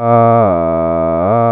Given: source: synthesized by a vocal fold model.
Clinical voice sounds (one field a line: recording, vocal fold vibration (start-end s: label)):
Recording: sustained vowel that changes in the middle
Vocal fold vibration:
0.00-0.37 s: 116.6 Hz, open quotient 0.51
0.57-1.17 s: 82.5 Hz, open quotient 0.25
1.37-1.52 s: 116.6 Hz, open quotient 0.51